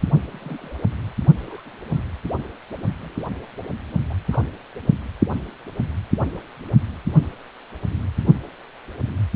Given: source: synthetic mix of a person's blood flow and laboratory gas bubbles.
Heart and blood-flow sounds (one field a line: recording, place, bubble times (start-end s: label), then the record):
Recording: Doppler ultrasound of blood flow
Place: precordium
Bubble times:
0.30-0.77 s: bubbles
1.46-2.02 s: bubbles
3.01-3.24 s: bubbles
3.40-3.44 s: bubbles
4.09-4.15 s: bubbles
4.31-4.43 s: bubbles
From the record:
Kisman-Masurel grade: 121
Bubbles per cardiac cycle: 1 to 2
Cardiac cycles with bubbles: 10 to 50%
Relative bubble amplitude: barely perceptible (0.100 to 0.250)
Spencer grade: 2 (many but less than half of the cardiac periods contain bubble signals, singularly or in groups)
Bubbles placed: only in the low amplitude regions of the cardiac cycle